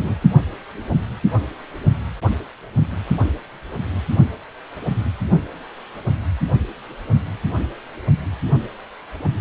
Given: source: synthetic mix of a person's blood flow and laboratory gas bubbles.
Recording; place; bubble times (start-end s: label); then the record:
Doppler ultrasound of blood flow; precordium
0.00-0.28 s: bubbles
From the record:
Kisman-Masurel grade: 212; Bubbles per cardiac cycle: several, 3 to 8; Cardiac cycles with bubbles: 1 to 10%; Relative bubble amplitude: moderate (0.250 to 0.450); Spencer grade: 1 (occasional bubble signal discernible with the cardiac motion signal, with majority of cardiac periods free of bubbles); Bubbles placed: anywhere in the cardiac cycle